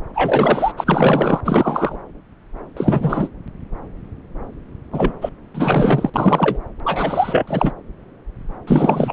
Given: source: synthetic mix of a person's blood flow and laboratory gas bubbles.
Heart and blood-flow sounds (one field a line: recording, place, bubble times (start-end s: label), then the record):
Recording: Doppler ultrasound of blood flow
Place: subclavian vein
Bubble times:
0.14-0.72 s: bubbles
0.77-1.41 s: bubbles
1.45-1.96 s: bubbles
2.77-3.28 s: bubbles
4.91-5.12 s: bubbles
5.21-5.30 s: bubbles
5.54-6.10 s: bubbles
6.14-6.59 s: bubbles
6.84-7.72 s: bubbles
8.66-9.13 s: bubbles
From the record:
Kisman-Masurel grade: 333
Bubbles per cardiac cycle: rolling drumbeat, 9 or more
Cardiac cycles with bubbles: 50 to 99%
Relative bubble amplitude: loud (0.450 to 0.775)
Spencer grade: 3 (all of the cardiac periods contain showers or single bubble signals, but not dominating or overriding the cardiac motion signals)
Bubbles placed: anywhere in the cardiac cycle